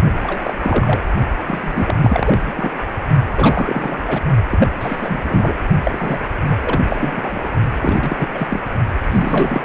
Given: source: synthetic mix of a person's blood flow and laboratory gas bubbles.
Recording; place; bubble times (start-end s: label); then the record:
Doppler ultrasound of blood flow; precordium
0.12-0.53 s: bubbles
0.59-0.99 s: bubbles
1.46-1.96 s: bubbles
2.01-2.39 s: bubbles
2.47-2.54 s: bubbles
2.56-2.71 s: bubbles
3.35-4.05 s: bubbles
4.08-4.21 s: bubbles
4.50-4.67 s: bubbles
4.79-5.56 s: bubbles
5.84-6.18 s: bubbles
6.48-6.80 s: bubbles
6.88-7.49 s: bubbles
7.80-8.28 s: bubbles
8.33-8.47 s: bubbles
8.49-8.61 s: bubbles
9.09-9.65 s: bubbles
From the record:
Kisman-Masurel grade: 332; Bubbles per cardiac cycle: rolling drumbeat, 9 or more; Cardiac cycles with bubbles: 50 to 99%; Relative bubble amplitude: moderate (0.250 to 0.450); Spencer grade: 3 (all of the cardiac periods contain showers or single bubble signals, but not dominating or overriding the cardiac motion signals); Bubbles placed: only in the low amplitude regions of the cardiac cycle